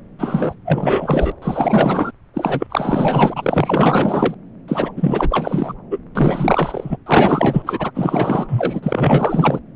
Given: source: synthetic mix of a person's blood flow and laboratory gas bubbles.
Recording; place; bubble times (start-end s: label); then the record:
Doppler ultrasound of blood flow; subclavian vein
0.18-0.54 s: bubbles
0.65-1.32 s: bubbles
1.42-2.11 s: bubbles
2.34-2.67 s: bubbles
2.69-4.34 s: bubbles
4.68-4.92 s: bubbles
4.96-5.75 s: bubbles
5.90-5.98 s: bubbles
6.15-6.97 s: bubbles
7.06-7.91 s: bubbles
7.94-9.60 s: bubbles
From the record:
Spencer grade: 4 (maximum detectable bubble signal sounding continuously throughout systole and diastole of every cardiac period, and overriding the amplitude of the normal cardiac signals); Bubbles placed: anywhere in the cardiac cycle